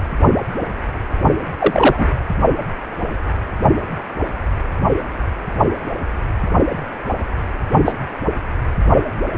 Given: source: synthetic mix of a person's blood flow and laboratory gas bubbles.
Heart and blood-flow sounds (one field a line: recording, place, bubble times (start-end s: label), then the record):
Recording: Doppler ultrasound of blood flow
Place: precordium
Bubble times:
1.58-2.08 s: bubbles
7.85-7.92 s: bubbles
From the record:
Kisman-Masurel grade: 123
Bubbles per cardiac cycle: 1 to 2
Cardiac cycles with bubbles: 10 to 50%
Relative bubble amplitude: loud (0.450 to 0.775)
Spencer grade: 2 (many but less than half of the cardiac periods contain bubble signals, singularly or in groups)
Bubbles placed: anywhere in the cardiac cycle